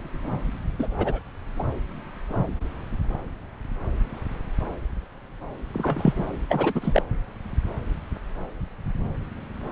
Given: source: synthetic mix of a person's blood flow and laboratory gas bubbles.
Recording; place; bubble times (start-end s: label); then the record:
Doppler ultrasound of blood flow; subclavian vein
0.79-0.87 s: bubbles
0.97-1.19 s: bubbles
1.58-1.64 s: bubbles
5.74-6.14 s: bubbles
6.16-6.24 s: bubbles
6.49-7.02 s: bubbles
From the record:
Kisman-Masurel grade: 222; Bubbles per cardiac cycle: several, 3 to 8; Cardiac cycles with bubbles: 10 to 50%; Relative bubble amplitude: moderate (0.250 to 0.450); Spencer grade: 2 (many but less than half of the cardiac periods contain bubble signals, singularly or in groups); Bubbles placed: anywhere in the cardiac cycle